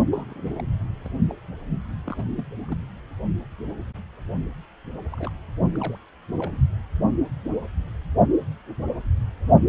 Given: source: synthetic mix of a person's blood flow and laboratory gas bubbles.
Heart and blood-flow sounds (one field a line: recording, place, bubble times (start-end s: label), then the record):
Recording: Doppler ultrasound of blood flow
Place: precordium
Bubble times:
0.12-0.64 s: bubbles
1.04-1.08 s: bubbles
1.29-1.35 s: bubbles
2.06-2.16 s: bubbles
2.18-2.25 s: bubbles
2.36-2.44 s: bubbles
2.69-2.77 s: bubbles
5.12-5.31 s: bubbles
5.75-5.98 s: bubbles
6.34-6.57 s: bubbles
From the record:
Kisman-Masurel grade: 221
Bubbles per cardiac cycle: several, 3 to 8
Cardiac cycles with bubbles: 10 to 50%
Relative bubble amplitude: barely perceptible (0.100 to 0.250)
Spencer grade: 2 (many but less than half of the cardiac periods contain bubble signals, singularly or in groups)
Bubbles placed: only in the low amplitude regions of the cardiac cycle